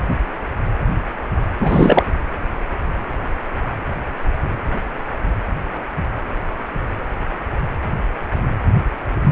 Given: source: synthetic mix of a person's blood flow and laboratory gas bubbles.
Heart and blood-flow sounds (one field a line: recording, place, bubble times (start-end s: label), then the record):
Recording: Doppler ultrasound of blood flow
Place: precordium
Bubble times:
1.57-2.12 s: bubbles
From the record:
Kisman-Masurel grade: 213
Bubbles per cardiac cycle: several, 3 to 8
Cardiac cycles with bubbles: 1 to 10%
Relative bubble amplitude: loud (0.450 to 0.775)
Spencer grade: 1 (occasional bubble signal discernible with the cardiac motion signal, with majority of cardiac periods free of bubbles)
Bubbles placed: anywhere in the cardiac cycle